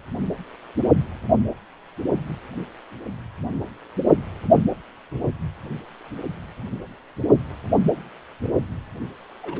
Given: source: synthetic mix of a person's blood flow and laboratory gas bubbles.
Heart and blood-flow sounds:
Doppler ultrasound of blood flow; precordium
9.42-9.60 s: bubbles
From the record:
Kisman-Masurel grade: 121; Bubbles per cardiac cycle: 1 to 2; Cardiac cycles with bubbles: 10 to 50%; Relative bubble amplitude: barely perceptible (0.100 to 0.250); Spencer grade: 2 (many but less than half of the cardiac periods contain bubble signals, singularly or in groups); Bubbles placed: only in the low amplitude regions of the cardiac cycle

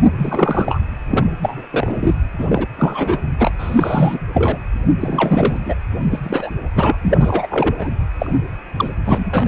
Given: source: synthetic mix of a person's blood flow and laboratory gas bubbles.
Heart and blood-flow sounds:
Doppler ultrasound of blood flow; precordium
0.18-0.82 s: bubbles
1.08-1.27 s: bubbles
1.42-1.67 s: bubbles
1.71-2.15 s: bubbles
2.38-2.66 s: bubbles
2.79-3.20 s: bubbles
3.38-3.51 s: bubbles
3.58-4.20 s: bubbles
4.33-4.58 s: bubbles
5.00-5.59 s: bubbles
5.65-5.75 s: bubbles
6.00-6.19 s: bubbles
6.23-6.50 s: bubbles
6.75-6.98 s: bubbles
7.03-7.47 s: bubbles
7.50-7.91 s: bubbles
8.18-8.38 s: bubbles
8.76-8.90 s: bubbles
9.04-9.47 s: bubbles
From the record:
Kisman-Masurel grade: 343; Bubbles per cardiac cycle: rolling drumbeat, 9 or more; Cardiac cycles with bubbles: 100%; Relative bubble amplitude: loud (0.450 to 0.775); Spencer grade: 3 (all of the cardiac periods contain showers or single bubble signals, but not dominating or overriding the cardiac motion signals); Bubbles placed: anywhere in the cardiac cycle

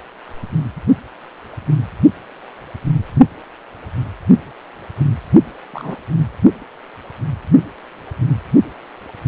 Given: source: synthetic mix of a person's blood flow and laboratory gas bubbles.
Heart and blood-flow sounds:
Doppler ultrasound of blood flow; precordium
5.73-5.96 s: bubbles
From the record:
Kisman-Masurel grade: 121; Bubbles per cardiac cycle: 1 to 2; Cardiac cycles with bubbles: 10 to 50%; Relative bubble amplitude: barely perceptible (0.100 to 0.250); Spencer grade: 2 (many but less than half of the cardiac periods contain bubble signals, singularly or in groups); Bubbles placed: anywhere in the cardiac cycle

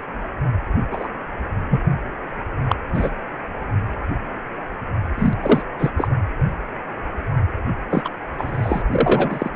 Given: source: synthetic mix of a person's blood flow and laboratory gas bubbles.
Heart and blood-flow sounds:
Doppler ultrasound of blood flow; precordium
0.00-0.04 s: bubbles
0.91-1.08 s: bubbles
1.69-1.80 s: bubbles
2.69-2.76 s: bubbles
2.94-3.10 s: bubbles
5.17-5.33 s: bubbles
5.42-5.62 s: bubbles
5.78-5.91 s: bubbles
5.97-6.08 s: bubbles
7.90-8.10 s: bubbles
8.38-8.82 s: bubbles
8.92-9.51 s: bubbles
From the record:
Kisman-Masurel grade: 233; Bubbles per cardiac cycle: several, 3 to 8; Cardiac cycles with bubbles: 50 to 99%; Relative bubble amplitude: loud (0.450 to 0.775); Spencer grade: 3 (all of the cardiac periods contain showers or single bubble signals, but not dominating or overriding the cardiac motion signals); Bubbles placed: only in the low amplitude regions of the cardiac cycle

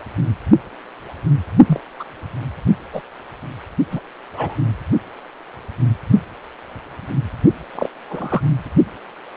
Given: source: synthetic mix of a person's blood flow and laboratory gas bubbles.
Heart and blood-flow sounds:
Doppler ultrasound of blood flow; precordium
1.66-1.80 s: bubbles
2.00-2.04 s: bubbles
2.93-3.01 s: bubbles
3.91-4.00 s: bubbles
4.34-4.56 s: bubbles
7.75-7.89 s: bubbles
8.08-8.43 s: bubbles
From the record:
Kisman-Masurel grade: 122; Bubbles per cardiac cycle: 1 to 2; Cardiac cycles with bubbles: 10 to 50%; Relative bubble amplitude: moderate (0.250 to 0.450); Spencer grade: 2 (many but less than half of the cardiac periods contain bubble signals, singularly or in groups); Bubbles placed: only in the low amplitude regions of the cardiac cycle

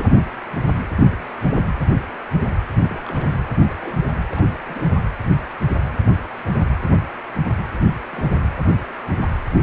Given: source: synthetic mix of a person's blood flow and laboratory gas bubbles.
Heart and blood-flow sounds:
Doppler ultrasound of blood flow; precordium
2.79-3.36 s: bubbles
3.58-3.98 s: bubbles
4.32-4.44 s: bubbles
4.54-4.57 s: bubbles
4.65-4.93 s: bubbles
8.13-8.46 s: bubbles
From the record:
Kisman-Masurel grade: 221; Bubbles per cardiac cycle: several, 3 to 8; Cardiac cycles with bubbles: 10 to 50%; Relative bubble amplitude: barely perceptible (0.100 to 0.250); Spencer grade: 2 (many but less than half of the cardiac periods contain bubble signals, singularly or in groups); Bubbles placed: anywhere in the cardiac cycle

